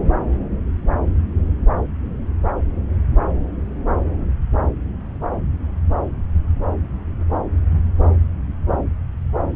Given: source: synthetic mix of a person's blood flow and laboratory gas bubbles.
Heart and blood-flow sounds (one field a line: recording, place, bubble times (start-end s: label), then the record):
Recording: Doppler ultrasound of blood flow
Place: subclavian vein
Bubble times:
no bubbles
From the record:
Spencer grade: 0 (complete lack of bubble signals)